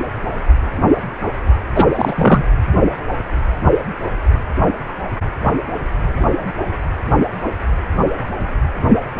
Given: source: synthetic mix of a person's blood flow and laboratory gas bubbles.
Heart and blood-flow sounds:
Doppler ultrasound of blood flow; precordium
1.75-1.85 s: bubbles
1.94-2.44 s: bubbles
From the record:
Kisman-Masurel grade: 213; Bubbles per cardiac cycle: several, 3 to 8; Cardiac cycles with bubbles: 1 to 10%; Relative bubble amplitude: loud (0.450 to 0.775); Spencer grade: 1 (occasional bubble signal discernible with the cardiac motion signal, with majority of cardiac periods free of bubbles); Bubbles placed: anywhere in the cardiac cycle

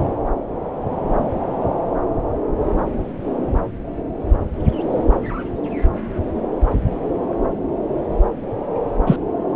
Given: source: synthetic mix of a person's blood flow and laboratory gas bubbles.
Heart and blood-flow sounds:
Doppler ultrasound of blood flow; subclavian vein
9.06-9.16 s: bubbles
From the record:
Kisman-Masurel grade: 113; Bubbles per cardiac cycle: 1 to 2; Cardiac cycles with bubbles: 1 to 10%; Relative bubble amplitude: loud (0.450 to 0.775); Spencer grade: 1 (occasional bubble signal discernible with the cardiac motion signal, with majority of cardiac periods free of bubbles); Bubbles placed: anywhere in the cardiac cycle

